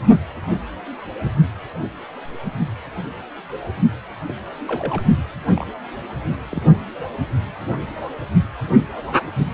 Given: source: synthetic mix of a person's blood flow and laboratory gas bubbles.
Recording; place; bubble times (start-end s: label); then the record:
Doppler ultrasound of blood flow; precordium
4.28-4.35 s: bubbles
4.67-5.01 s: bubbles
5.54-5.67 s: bubbles
6.49-6.62 s: bubbles
From the record:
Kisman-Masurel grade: 121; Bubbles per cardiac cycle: 1 to 2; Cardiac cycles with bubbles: 10 to 50%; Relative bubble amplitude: barely perceptible (0.100 to 0.250); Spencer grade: 2 (many but less than half of the cardiac periods contain bubble signals, singularly or in groups); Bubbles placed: only in the low amplitude regions of the cardiac cycle